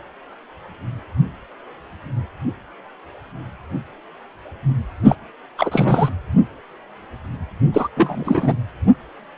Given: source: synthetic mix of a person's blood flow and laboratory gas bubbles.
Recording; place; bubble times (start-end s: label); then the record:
Doppler ultrasound of blood flow; precordium
5.03-5.15 s: bubbles
5.58-6.09 s: bubbles
7.73-7.88 s: bubbles
7.96-8.54 s: bubbles
From the record:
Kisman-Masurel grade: 223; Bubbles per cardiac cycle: several, 3 to 8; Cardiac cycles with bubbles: 10 to 50%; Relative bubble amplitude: loud (0.450 to 0.775); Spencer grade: 2 (many but less than half of the cardiac periods contain bubble signals, singularly or in groups); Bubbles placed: anywhere in the cardiac cycle